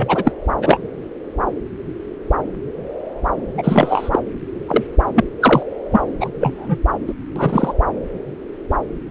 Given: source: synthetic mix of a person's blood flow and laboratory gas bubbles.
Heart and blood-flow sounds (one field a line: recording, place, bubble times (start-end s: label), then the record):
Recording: Doppler ultrasound of blood flow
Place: subclavian vein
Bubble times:
0.00-0.33 s: bubbles
0.62-0.80 s: bubbles
3.58-4.19 s: bubbles
4.67-4.84 s: bubbles
5.15-5.24 s: bubbles
5.40-5.62 s: bubbles
5.92-6.01 s: bubbles
6.20-6.29 s: bubbles
6.40-6.79 s: bubbles
7.07-7.12 s: bubbles
7.36-7.73 s: bubbles
From the record:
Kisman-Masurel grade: 233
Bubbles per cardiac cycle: several, 3 to 8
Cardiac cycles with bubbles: 50 to 99%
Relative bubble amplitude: loud (0.450 to 0.775)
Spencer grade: 3 (all of the cardiac periods contain showers or single bubble signals, but not dominating or overriding the cardiac motion signals)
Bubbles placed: anywhere in the cardiac cycle